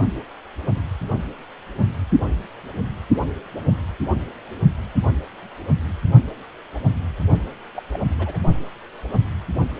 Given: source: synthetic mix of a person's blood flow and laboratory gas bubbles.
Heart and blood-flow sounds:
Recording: Doppler ultrasound of blood flow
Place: precordium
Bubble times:
7.74-7.82 s: bubbles
7.92-7.99 s: bubbles
8.18-8.39 s: bubbles
8.48-8.59 s: bubbles
From the record:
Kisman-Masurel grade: 221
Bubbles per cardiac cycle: several, 3 to 8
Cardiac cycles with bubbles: 10 to 50%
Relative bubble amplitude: barely perceptible (0.100 to 0.250)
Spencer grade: 2 (many but less than half of the cardiac periods contain bubble signals, singularly or in groups)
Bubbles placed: only in the low amplitude regions of the cardiac cycle

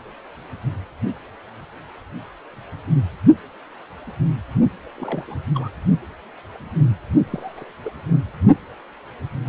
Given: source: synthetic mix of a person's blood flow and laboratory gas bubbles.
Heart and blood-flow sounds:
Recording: Doppler ultrasound of blood flow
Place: precordium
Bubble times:
4.97-5.24 s: bubbles
5.27-5.38 s: bubbles
5.54-5.70 s: bubbles
7.26-7.71 s: bubbles
7.84-8.30 s: bubbles
From the record:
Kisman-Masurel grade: 221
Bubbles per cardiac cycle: several, 3 to 8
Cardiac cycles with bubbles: 10 to 50%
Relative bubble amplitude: barely perceptible (0.100 to 0.250)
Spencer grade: 2 (many but less than half of the cardiac periods contain bubble signals, singularly or in groups)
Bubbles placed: only in the low amplitude regions of the cardiac cycle

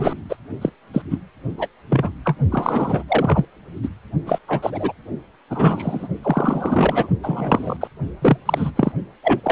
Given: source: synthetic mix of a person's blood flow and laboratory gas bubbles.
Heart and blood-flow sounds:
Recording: Doppler ultrasound of blood flow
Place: precordium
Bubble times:
0.00-0.13 s: bubbles
0.29-0.37 s: bubbles
0.61-0.69 s: bubbles
0.93-1.02 s: bubbles
1.10-1.19 s: bubbles
1.57-1.68 s: bubbles
1.90-2.12 s: bubbles
2.25-2.36 s: bubbles
2.51-3.03 s: bubbles
3.08-3.45 s: bubbles
3.83-3.89 s: bubbles
4.26-4.38 s: bubbles
4.48-4.93 s: bubbles
5.50-6.08 s: bubbles
6.22-7.09 s: bubbles
7.23-7.77 s: bubbles
7.80-7.88 s: bubbles
8.22-8.37 s: bubbles
8.46-8.71 s: bubbles
8.76-8.92 s: bubbles
9.23-9.41 s: bubbles
9.43-9.52 s: bubbles
From the record:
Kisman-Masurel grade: 243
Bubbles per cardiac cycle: several, 3 to 8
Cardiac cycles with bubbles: 100%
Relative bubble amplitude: loud (0.450 to 0.775)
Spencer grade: 3 (all of the cardiac periods contain showers or single bubble signals, but not dominating or overriding the cardiac motion signals)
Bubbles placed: only in the low amplitude regions of the cardiac cycle

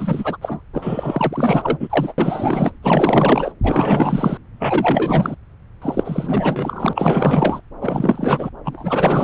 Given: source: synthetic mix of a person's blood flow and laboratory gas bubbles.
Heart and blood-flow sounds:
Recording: Doppler ultrasound of blood flow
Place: subclavian vein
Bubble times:
0.00-0.38 s: bubbles
0.41-0.63 s: bubbles
0.73-2.12 s: bubbles
2.18-2.72 s: bubbles
2.83-3.52 s: bubbles
3.62-4.38 s: bubbles
4.59-5.36 s: bubbles
5.82-7.61 s: bubbles
7.81-8.49 s: bubbles
8.64-9.24 s: bubbles
From the record:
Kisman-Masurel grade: 444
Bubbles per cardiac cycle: continuous sound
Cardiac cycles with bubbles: 100%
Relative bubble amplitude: maximal (0.775 to 0.999)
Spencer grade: 4 (maximum detectable bubble signal sounding continuously throughout systole and diastole of every cardiac period, and overriding the amplitude of the normal cardiac signals)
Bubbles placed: anywhere in the cardiac cycle

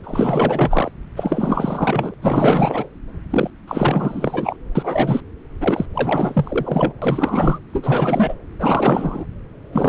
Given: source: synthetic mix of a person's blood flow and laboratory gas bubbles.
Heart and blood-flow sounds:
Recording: Doppler ultrasound of blood flow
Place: subclavian vein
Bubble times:
0.04-0.92 s: bubbles
1.16-2.14 s: bubbles
2.21-2.88 s: bubbles
3.30-3.50 s: bubbles
3.67-4.57 s: bubbles
4.75-5.21 s: bubbles
5.60-5.86 s: bubbles
5.93-6.93 s: bubbles
7.01-7.59 s: bubbles
7.73-8.35 s: bubbles
8.59-9.26 s: bubbles
9.72-9.89 s: bubbles
From the record:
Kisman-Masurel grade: 444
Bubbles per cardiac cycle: continuous sound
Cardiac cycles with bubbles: 100%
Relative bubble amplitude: maximal (0.775 to 0.999)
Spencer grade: 4 (maximum detectable bubble signal sounding continuously throughout systole and diastole of every cardiac period, and overriding the amplitude of the normal cardiac signals)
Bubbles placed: anywhere in the cardiac cycle

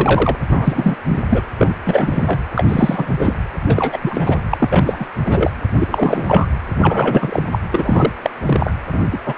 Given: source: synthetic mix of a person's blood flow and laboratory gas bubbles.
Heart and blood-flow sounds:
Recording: Doppler ultrasound of blood flow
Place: precordium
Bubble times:
0.00-0.36 s: bubbles
0.49-0.96 s: bubbles
1.08-1.19 s: bubbles
1.30-1.50 s: bubbles
1.58-1.73 s: bubbles
1.83-2.39 s: bubbles
2.55-2.65 s: bubbles
2.69-3.37 s: bubbles
3.66-3.99 s: bubbles
4.01-4.38 s: bubbles
4.50-5.07 s: bubbles
5.25-5.50 s: bubbles
5.78-6.46 s: bubbles
6.80-7.49 s: bubbles
7.52-7.59 s: bubbles
7.71-8.12 s: bubbles
8.23-8.30 s: bubbles
8.46-8.73 s: bubbles
8.92-8.99 s: bubbles
9.12-9.19 s: bubbles
9.26-9.38 s: bubbles
From the record:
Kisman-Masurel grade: 343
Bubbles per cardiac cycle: rolling drumbeat, 9 or more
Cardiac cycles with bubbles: 100%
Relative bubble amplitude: loud (0.450 to 0.775)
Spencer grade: 3 (all of the cardiac periods contain showers or single bubble signals, but not dominating or overriding the cardiac motion signals)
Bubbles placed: anywhere in the cardiac cycle

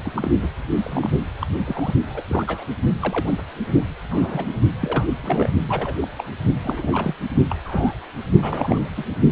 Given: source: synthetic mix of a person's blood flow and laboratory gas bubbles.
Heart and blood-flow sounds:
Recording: Doppler ultrasound of blood flow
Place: precordium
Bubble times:
0.03-0.12 s: bubbles
0.15-0.32 s: bubbles
0.42-0.51 s: bubbles
0.83-1.10 s: bubbles
1.41-1.47 s: bubbles
1.65-1.94 s: bubbles
2.06-2.23 s: bubbles
2.27-2.67 s: bubbles
3.00-3.35 s: bubbles
4.10-4.60 s: bubbles
4.82-5.08 s: bubbles
5.21-5.52 s: bubbles
5.69-5.96 s: bubbles
6.01-6.08 s: bubbles
6.18-6.24 s: bubbles
6.62-7.14 s: bubbles
7.49-7.56 s: bubbles
7.64-7.93 s: bubbles
8.41-8.88 s: bubbles
8.96-9.04 s: bubbles
From the record:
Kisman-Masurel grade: 242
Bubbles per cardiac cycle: several, 3 to 8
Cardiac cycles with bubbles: 100%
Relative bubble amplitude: moderate (0.250 to 0.450)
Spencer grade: 3 (all of the cardiac periods contain showers or single bubble signals, but not dominating or overriding the cardiac motion signals)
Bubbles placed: only in the low amplitude regions of the cardiac cycle

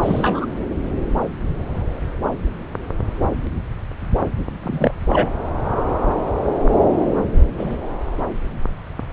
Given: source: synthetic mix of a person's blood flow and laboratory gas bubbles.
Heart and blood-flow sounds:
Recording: Doppler ultrasound of blood flow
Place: subclavian vein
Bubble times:
0.03-0.46 s: bubbles
4.62-4.91 s: bubbles
5.09-5.30 s: bubbles
7.57-7.78 s: bubbles
From the record:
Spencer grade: 2 (many but less than half of the cardiac periods contain bubble signals, singularly or in groups)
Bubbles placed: anywhere in the cardiac cycle

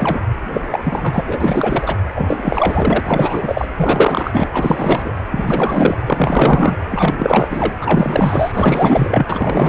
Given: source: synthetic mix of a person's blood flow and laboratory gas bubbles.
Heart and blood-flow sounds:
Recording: Doppler ultrasound of blood flow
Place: precordium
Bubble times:
0.00-0.22 s: bubbles
0.53-0.63 s: bubbles
0.71-0.79 s: bubbles
0.83-1.96 s: bubbles
2.14-3.00 s: bubbles
3.03-3.68 s: bubbles
3.77-4.48 s: bubbles
4.52-5.14 s: bubbles
5.30-5.97 s: bubbles
6.06-6.77 s: bubbles
6.90-7.14 s: bubbles
7.17-7.72 s: bubbles
7.80-9.25 s: bubbles
9.29-9.69 s: bubbles
From the record:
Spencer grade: 4 (maximum detectable bubble signal sounding continuously throughout systole and diastole of every cardiac period, and overriding the amplitude of the normal cardiac signals)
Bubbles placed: anywhere in the cardiac cycle

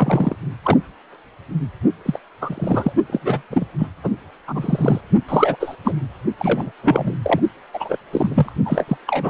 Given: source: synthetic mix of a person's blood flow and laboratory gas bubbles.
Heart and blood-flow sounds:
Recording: Doppler ultrasound of blood flow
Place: precordium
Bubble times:
0.00-0.35 s: bubbles
0.64-0.78 s: bubbles
2.05-2.19 s: bubbles
2.41-2.93 s: bubbles
3.08-3.42 s: bubbles
3.50-3.65 s: bubbles
3.78-3.88 s: bubbles
4.03-4.09 s: bubbles
4.47-5.00 s: bubbles
5.28-5.56 s: bubbles
5.59-5.76 s: bubbles
5.84-5.93 s: bubbles
6.39-6.71 s: bubbles
6.83-7.14 s: bubbles
7.22-7.40 s: bubbles
7.73-7.97 s: bubbles
8.12-8.53 s: bubbles
8.65-8.84 s: bubbles
8.88-8.97 s: bubbles
9.07-9.30 s: bubbles
From the record:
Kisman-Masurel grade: 243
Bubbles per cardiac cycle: several, 3 to 8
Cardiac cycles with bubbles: 100%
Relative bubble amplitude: loud (0.450 to 0.775)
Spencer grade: 3 (all of the cardiac periods contain showers or single bubble signals, but not dominating or overriding the cardiac motion signals)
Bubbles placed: only in the low amplitude regions of the cardiac cycle

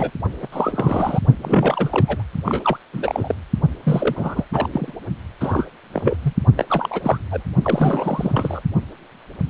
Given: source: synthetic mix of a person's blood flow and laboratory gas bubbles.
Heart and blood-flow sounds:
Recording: Doppler ultrasound of blood flow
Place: precordium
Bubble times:
0.00-0.11 s: bubbles
0.42-0.47 s: bubbles
0.52-1.20 s: bubbles
1.42-2.23 s: bubbles
2.45-2.77 s: bubbles
2.93-3.35 s: bubbles
3.83-4.45 s: bubbles
4.52-4.68 s: bubbles
4.72-4.93 s: bubbles
5.40-5.66 s: bubbles
5.94-6.17 s: bubbles
6.23-6.33 s: bubbles
6.56-6.65 s: bubbles
6.67-7.18 s: bubbles
7.31-7.42 s: bubbles
7.62-8.61 s: bubbles
From the record:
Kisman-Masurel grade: 332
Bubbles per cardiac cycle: rolling drumbeat, 9 or more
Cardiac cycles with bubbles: 50 to 99%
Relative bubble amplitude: moderate (0.250 to 0.450)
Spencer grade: 3 (all of the cardiac periods contain showers or single bubble signals, but not dominating or overriding the cardiac motion signals)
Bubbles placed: only in the low amplitude regions of the cardiac cycle

